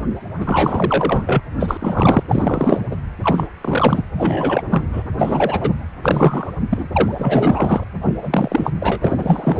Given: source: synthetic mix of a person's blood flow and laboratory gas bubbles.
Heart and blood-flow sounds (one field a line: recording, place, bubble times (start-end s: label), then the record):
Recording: Doppler ultrasound of blood flow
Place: precordium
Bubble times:
0.40-1.40 s: bubbles
1.59-2.23 s: bubbles
2.28-2.80 s: bubbles
2.91-2.96 s: bubbles
3.23-3.47 s: bubbles
3.61-4.02 s: bubbles
4.17-4.62 s: bubbles
4.71-4.82 s: bubbles
4.92-5.02 s: bubbles
5.18-5.71 s: bubbles
6.02-6.53 s: bubbles
6.70-6.88 s: bubbles
6.92-7.83 s: bubbles
8.05-8.14 s: bubbles
8.21-8.71 s: bubbles
8.80-8.97 s: bubbles
9.01-9.60 s: bubbles
From the record:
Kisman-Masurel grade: 343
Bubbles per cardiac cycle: rolling drumbeat, 9 or more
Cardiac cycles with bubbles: 100%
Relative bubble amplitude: loud (0.450 to 0.775)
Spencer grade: 3 (all of the cardiac periods contain showers or single bubble signals, but not dominating or overriding the cardiac motion signals)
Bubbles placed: anywhere in the cardiac cycle